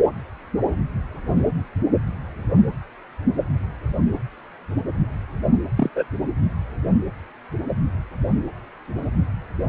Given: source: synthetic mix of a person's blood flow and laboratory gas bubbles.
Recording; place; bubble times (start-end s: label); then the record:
Doppler ultrasound of blood flow; precordium
5.75-5.90 s: bubbles
5.96-6.04 s: bubbles
From the record:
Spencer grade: 1 (occasional bubble signal discernible with the cardiac motion signal, with majority of cardiac periods free of bubbles); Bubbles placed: anywhere in the cardiac cycle